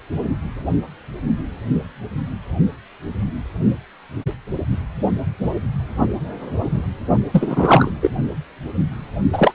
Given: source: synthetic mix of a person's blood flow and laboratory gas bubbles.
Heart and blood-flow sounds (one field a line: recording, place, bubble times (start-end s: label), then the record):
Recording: Doppler ultrasound of blood flow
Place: precordium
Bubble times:
7.32-7.91 s: bubbles
8.02-8.10 s: bubbles
9.32-9.54 s: bubbles
From the record:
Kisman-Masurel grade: 223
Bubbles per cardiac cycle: several, 3 to 8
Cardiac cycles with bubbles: 10 to 50%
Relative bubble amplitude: loud (0.450 to 0.775)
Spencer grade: 2 (many but less than half of the cardiac periods contain bubble signals, singularly or in groups)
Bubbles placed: only in the low amplitude regions of the cardiac cycle